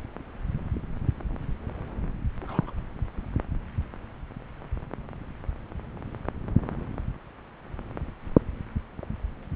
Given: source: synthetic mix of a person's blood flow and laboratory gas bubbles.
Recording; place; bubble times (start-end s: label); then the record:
Doppler ultrasound of blood flow; subclavian vein
2.41-2.73 s: bubbles
From the record:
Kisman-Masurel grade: 111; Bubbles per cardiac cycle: 1 to 2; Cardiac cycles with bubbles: 1 to 10%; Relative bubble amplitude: barely perceptible (0.100 to 0.250); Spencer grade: 1 (occasional bubble signal discernible with the cardiac motion signal, with majority of cardiac periods free of bubbles); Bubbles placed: anywhere in the cardiac cycle